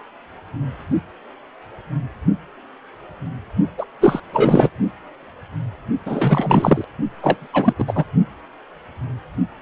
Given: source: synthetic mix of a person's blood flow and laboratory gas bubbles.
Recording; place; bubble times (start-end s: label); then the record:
Doppler ultrasound of blood flow; precordium
3.77-3.85 s: bubbles
4.01-4.20 s: bubbles
4.32-4.70 s: bubbles
6.05-6.84 s: bubbles
7.22-7.47 s: bubbles
7.53-7.73 s: bubbles
7.78-7.85 s: bubbles
7.88-8.04 s: bubbles
From the record:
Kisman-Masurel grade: 333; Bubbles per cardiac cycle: rolling drumbeat, 9 or more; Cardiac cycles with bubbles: 50 to 99%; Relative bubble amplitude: loud (0.450 to 0.775); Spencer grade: 3 (all of the cardiac periods contain showers or single bubble signals, but not dominating or overriding the cardiac motion signals); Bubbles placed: only in the low amplitude regions of the cardiac cycle